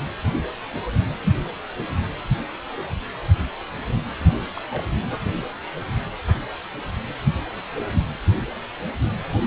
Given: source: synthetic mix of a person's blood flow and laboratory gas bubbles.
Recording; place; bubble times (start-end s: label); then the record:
Doppler ultrasound of blood flow; precordium
4.20-4.25 s: bubbles
4.55-4.64 s: bubbles
4.71-4.83 s: bubbles
From the record:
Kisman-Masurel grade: 211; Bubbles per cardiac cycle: several, 3 to 8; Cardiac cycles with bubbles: 1 to 10%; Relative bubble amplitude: barely perceptible (0.100 to 0.250); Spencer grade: 1 (occasional bubble signal discernible with the cardiac motion signal, with majority of cardiac periods free of bubbles); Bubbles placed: anywhere in the cardiac cycle